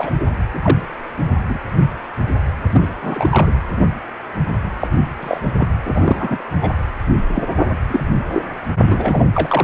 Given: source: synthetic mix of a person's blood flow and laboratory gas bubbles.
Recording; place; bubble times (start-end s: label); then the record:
Doppler ultrasound of blood flow; precordium
0.00-0.10 s: bubbles
0.19-0.24 s: bubbles
0.54-0.59 s: bubbles
0.62-0.78 s: bubbles
1.49-1.58 s: bubbles
2.73-2.92 s: bubbles
3.02-3.53 s: bubbles
4.79-4.88 s: bubbles
5.21-5.39 s: bubbles
5.58-5.68 s: bubbles
5.85-6.43 s: bubbles
6.61-6.72 s: bubbles
7.34-7.43 s: bubbles
7.89-8.04 s: bubbles
8.34-8.43 s: bubbles
8.84-9.32 s: bubbles
9.35-9.64 s: bubbles
From the record:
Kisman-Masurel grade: 232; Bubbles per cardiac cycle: several, 3 to 8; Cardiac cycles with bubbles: 50 to 99%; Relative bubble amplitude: moderate (0.250 to 0.450); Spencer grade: 3 (all of the cardiac periods contain showers or single bubble signals, but not dominating or overriding the cardiac motion signals); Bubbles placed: anywhere in the cardiac cycle